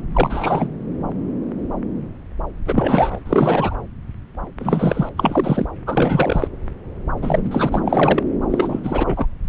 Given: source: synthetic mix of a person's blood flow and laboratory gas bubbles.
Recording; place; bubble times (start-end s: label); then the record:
Doppler ultrasound of blood flow; subclavian vein
0.13-0.69 s: bubbles
2.66-3.19 s: bubbles
3.25-3.75 s: bubbles
4.60-5.09 s: bubbles
5.17-5.66 s: bubbles
5.86-6.47 s: bubbles
7.22-7.81 s: bubbles
7.85-8.23 s: bubbles
8.50-9.26 s: bubbles
From the record:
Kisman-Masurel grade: 332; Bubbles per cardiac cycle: rolling drumbeat, 9 or more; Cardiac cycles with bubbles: 50 to 99%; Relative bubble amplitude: moderate (0.250 to 0.450); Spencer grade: 3 (all of the cardiac periods contain showers or single bubble signals, but not dominating or overriding the cardiac motion signals); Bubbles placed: anywhere in the cardiac cycle